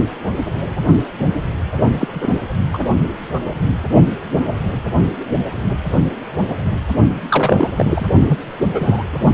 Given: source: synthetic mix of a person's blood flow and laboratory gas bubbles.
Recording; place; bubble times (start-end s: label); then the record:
Doppler ultrasound of blood flow; precordium
2.00-2.07 s: bubbles
2.13-2.33 s: bubbles
2.73-2.78 s: bubbles
7.29-7.70 s: bubbles
7.77-8.06 s: bubbles
8.29-8.38 s: bubbles
8.53-9.04 s: bubbles
From the record:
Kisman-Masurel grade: 223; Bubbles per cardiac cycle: several, 3 to 8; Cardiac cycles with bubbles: 10 to 50%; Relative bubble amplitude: loud (0.450 to 0.775); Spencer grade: 2 (many but less than half of the cardiac periods contain bubble signals, singularly or in groups); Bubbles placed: only in the low amplitude regions of the cardiac cycle